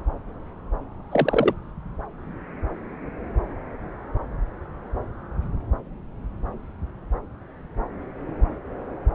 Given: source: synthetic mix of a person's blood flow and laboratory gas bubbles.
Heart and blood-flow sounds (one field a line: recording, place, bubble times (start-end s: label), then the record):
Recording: Doppler ultrasound of blood flow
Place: subclavian vein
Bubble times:
1.11-1.53 s: bubbles
From the record:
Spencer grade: 1 (occasional bubble signal discernible with the cardiac motion signal, with majority of cardiac periods free of bubbles)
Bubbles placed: anywhere in the cardiac cycle